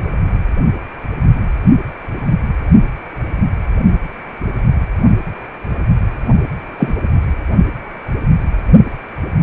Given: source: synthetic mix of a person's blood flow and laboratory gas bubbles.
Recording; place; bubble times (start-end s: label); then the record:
Doppler ultrasound of blood flow; precordium
6.79-6.94 s: bubbles
From the record:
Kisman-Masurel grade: 113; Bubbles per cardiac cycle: 1 to 2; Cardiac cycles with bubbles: 1 to 10%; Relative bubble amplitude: loud (0.450 to 0.775); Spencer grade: 1 (occasional bubble signal discernible with the cardiac motion signal, with majority of cardiac periods free of bubbles); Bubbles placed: only in the low amplitude regions of the cardiac cycle